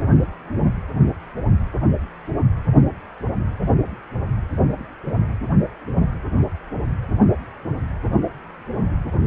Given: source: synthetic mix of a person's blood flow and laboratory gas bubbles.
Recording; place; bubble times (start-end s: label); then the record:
Doppler ultrasound of blood flow; precordium
0.00-0.08 s: bubbles
From the record:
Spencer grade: 2 (many but less than half of the cardiac periods contain bubble signals, singularly or in groups); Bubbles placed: only in the low amplitude regions of the cardiac cycle